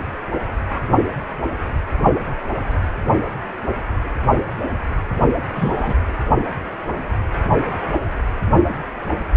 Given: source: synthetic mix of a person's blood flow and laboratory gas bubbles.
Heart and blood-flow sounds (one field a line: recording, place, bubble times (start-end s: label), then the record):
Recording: Doppler ultrasound of blood flow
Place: precordium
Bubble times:
5.55-5.94 s: bubbles
From the record:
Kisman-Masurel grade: 113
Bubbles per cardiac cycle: 1 to 2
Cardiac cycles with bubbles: 1 to 10%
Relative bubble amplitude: loud (0.450 to 0.775)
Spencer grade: 1 (occasional bubble signal discernible with the cardiac motion signal, with majority of cardiac periods free of bubbles)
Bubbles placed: anywhere in the cardiac cycle